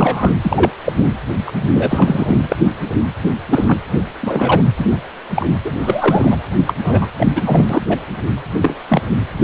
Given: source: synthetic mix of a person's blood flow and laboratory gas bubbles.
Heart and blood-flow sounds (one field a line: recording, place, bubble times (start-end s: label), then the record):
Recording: Doppler ultrasound of blood flow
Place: precordium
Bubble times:
0.00-0.30 s: bubbles
0.41-0.71 s: bubbles
0.85-0.93 s: bubbles
0.97-1.03 s: bubbles
1.46-1.52 s: bubbles
1.73-2.38 s: bubbles
2.48-2.56 s: bubbles
3.50-3.65 s: bubbles
3.67-3.79 s: bubbles
4.21-4.62 s: bubbles
4.77-4.87 s: bubbles
4.92-5.00 s: bubbles
5.35-5.46 s: bubbles
5.64-5.71 s: bubbles
5.82-6.38 s: bubbles
6.67-6.73 s: bubbles
6.83-7.08 s: bubbles
7.17-7.27 s: bubbles
7.35-8.02 s: bubbles
8.62-8.77 s: bubbles
8.89-9.02 s: bubbles
9.39-9.44 s: bubbles
From the record:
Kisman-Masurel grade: 243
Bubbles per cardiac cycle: several, 3 to 8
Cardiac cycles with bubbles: 100%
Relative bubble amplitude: loud (0.450 to 0.775)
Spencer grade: 3 (all of the cardiac periods contain showers or single bubble signals, but not dominating or overriding the cardiac motion signals)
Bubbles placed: anywhere in the cardiac cycle